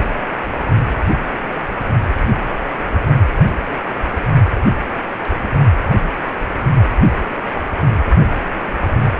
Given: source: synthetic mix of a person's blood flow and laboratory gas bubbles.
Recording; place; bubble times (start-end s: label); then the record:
Doppler ultrasound of blood flow; precordium
no bubbles
From the record:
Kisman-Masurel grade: 000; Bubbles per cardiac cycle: 0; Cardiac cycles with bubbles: 0%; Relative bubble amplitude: no bubbles discernible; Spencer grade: 0 (complete lack of bubble signals)